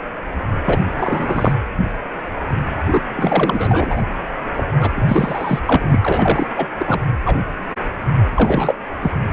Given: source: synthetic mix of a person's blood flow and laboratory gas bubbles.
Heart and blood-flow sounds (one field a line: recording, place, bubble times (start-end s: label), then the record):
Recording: Doppler ultrasound of blood flow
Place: precordium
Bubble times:
0.65-0.83 s: bubbles
0.97-1.53 s: bubbles
2.92-3.02 s: bubbles
3.17-4.02 s: bubbles
4.54-4.63 s: bubbles
4.76-5.59 s: bubbles
5.67-6.00 s: bubbles
6.02-6.46 s: bubbles
6.56-6.67 s: bubbles
6.79-7.00 s: bubbles
7.25-7.38 s: bubbles
8.31-8.74 s: bubbles
9.00-9.12 s: bubbles
From the record:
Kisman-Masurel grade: 333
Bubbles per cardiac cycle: rolling drumbeat, 9 or more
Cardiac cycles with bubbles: 50 to 99%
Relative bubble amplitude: loud (0.450 to 0.775)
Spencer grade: 3 (all of the cardiac periods contain showers or single bubble signals, but not dominating or overriding the cardiac motion signals)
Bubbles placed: anywhere in the cardiac cycle